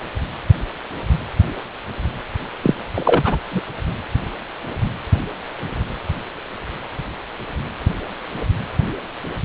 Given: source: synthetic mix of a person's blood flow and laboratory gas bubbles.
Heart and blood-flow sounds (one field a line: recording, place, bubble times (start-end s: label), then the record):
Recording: Doppler ultrasound of blood flow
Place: precordium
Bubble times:
2.62-2.75 s: bubbles
2.94-3.39 s: bubbles
3.50-3.61 s: bubbles
From the record:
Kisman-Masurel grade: 223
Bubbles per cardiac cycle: several, 3 to 8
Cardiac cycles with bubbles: 10 to 50%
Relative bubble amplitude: loud (0.450 to 0.775)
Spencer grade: 2 (many but less than half of the cardiac periods contain bubble signals, singularly or in groups)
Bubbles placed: anywhere in the cardiac cycle